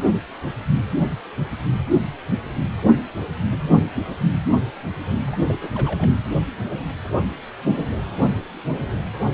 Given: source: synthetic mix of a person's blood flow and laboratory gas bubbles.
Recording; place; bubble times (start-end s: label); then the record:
Doppler ultrasound of blood flow; precordium
5.25-5.37 s: bubbles
5.44-5.58 s: bubbles
5.62-5.70 s: bubbles
5.75-6.12 s: bubbles
From the record:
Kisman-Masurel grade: 211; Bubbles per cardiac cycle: several, 3 to 8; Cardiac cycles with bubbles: 1 to 10%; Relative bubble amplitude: barely perceptible (0.100 to 0.250); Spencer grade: 1 (occasional bubble signal discernible with the cardiac motion signal, with majority of cardiac periods free of bubbles); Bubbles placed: anywhere in the cardiac cycle